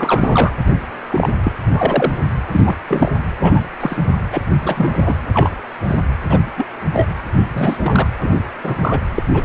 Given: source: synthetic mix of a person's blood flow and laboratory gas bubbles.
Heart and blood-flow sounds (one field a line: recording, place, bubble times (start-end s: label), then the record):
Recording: Doppler ultrasound of blood flow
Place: precordium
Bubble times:
0.00-0.53 s: bubbles
1.07-1.29 s: bubbles
1.44-1.52 s: bubbles
1.70-2.12 s: bubbles
2.51-2.61 s: bubbles
2.64-2.76 s: bubbles
2.87-3.12 s: bubbles
3.40-3.60 s: bubbles
3.80-3.97 s: bubbles
4.32-4.42 s: bubbles
4.61-5.17 s: bubbles
5.33-5.50 s: bubbles
5.88-5.96 s: bubbles
6.29-6.40 s: bubbles
6.57-6.66 s: bubbles
6.94-7.06 s: bubbles
7.55-7.77 s: bubbles
7.81-8.10 s: bubbles
8.22-8.35 s: bubbles
8.63-8.74 s: bubbles
8.79-8.99 s: bubbles
9.11-9.23 s: bubbles
9.33-9.45 s: bubbles
From the record:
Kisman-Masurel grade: 243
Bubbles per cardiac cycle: several, 3 to 8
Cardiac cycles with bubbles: 100%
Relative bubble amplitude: loud (0.450 to 0.775)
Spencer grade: 3 (all of the cardiac periods contain showers or single bubble signals, but not dominating or overriding the cardiac motion signals)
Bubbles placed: anywhere in the cardiac cycle